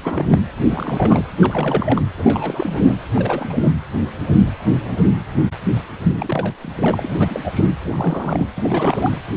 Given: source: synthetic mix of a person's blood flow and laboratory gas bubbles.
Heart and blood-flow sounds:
Doppler ultrasound of blood flow; precordium
0.04-0.39 s: bubbles
0.70-1.25 s: bubbles
1.40-2.02 s: bubbles
2.17-2.94 s: bubbles
3.14-3.73 s: bubbles
6.17-6.52 s: bubbles
6.60-7.70 s: bubbles
7.81-8.47 s: bubbles
8.56-9.18 s: bubbles
From the record:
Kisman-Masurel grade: 332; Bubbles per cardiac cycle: rolling drumbeat, 9 or more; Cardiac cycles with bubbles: 50 to 99%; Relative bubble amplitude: moderate (0.250 to 0.450); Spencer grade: 3 (all of the cardiac periods contain showers or single bubble signals, but not dominating or overriding the cardiac motion signals); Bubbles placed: anywhere in the cardiac cycle

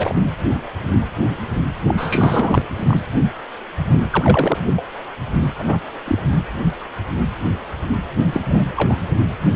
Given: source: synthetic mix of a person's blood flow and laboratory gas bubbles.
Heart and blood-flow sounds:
Doppler ultrasound of blood flow; precordium
0.00-0.24 s: bubbles
1.86-1.95 s: bubbles
1.97-2.62 s: bubbles
2.76-3.00 s: bubbles
4.10-4.58 s: bubbles
4.71-4.83 s: bubbles
5.58-5.77 s: bubbles
6.05-6.19 s: bubbles
8.32-8.41 s: bubbles
8.49-8.63 s: bubbles
8.76-8.96 s: bubbles
From the record:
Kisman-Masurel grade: 232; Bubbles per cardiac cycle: several, 3 to 8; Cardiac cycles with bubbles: 50 to 99%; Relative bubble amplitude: moderate (0.250 to 0.450); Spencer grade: 3 (all of the cardiac periods contain showers or single bubble signals, but not dominating or overriding the cardiac motion signals); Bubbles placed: anywhere in the cardiac cycle

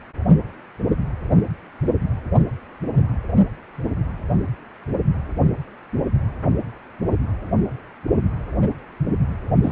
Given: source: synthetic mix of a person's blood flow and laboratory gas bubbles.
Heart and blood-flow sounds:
Doppler ultrasound of blood flow; precordium
9.63-9.72 s: bubbles
From the record:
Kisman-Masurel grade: 223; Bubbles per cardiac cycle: several, 3 to 8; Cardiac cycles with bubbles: 10 to 50%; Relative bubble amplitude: loud (0.450 to 0.775); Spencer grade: 2 (many but less than half of the cardiac periods contain bubble signals, singularly or in groups); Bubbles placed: anywhere in the cardiac cycle

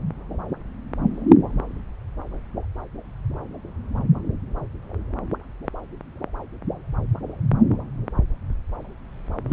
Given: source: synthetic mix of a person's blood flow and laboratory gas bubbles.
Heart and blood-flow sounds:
Doppler ultrasound of blood flow; subclavian vein
9.49-9.53 s: bubbles
From the record:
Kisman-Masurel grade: 211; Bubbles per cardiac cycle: several, 3 to 8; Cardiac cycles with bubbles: 1 to 10%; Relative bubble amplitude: barely perceptible (0.100 to 0.250); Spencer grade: 1 (occasional bubble signal discernible with the cardiac motion signal, with majority of cardiac periods free of bubbles); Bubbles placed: anywhere in the cardiac cycle

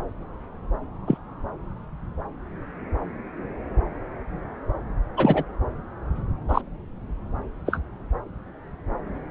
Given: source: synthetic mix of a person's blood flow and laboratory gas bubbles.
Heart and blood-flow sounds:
Doppler ultrasound of blood flow; subclavian vein
1.06-1.17 s: bubbles
5.17-5.43 s: bubbles
6.49-6.62 s: bubbles
7.66-7.80 s: bubbles
From the record:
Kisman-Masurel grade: 122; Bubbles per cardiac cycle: 1 to 2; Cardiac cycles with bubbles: 10 to 50%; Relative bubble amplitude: moderate (0.250 to 0.450); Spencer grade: 2 (many but less than half of the cardiac periods contain bubble signals, singularly or in groups); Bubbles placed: anywhere in the cardiac cycle

